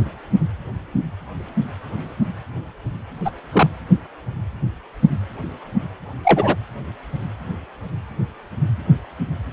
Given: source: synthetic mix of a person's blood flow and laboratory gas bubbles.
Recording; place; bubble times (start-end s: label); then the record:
Doppler ultrasound of blood flow; precordium
3.25-3.31 s: bubbles
3.52-3.68 s: bubbles
6.24-6.55 s: bubbles
From the record:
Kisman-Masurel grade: 113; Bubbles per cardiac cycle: 1 to 2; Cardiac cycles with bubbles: 1 to 10%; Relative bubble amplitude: loud (0.450 to 0.775); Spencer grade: 1 (occasional bubble signal discernible with the cardiac motion signal, with majority of cardiac periods free of bubbles); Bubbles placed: anywhere in the cardiac cycle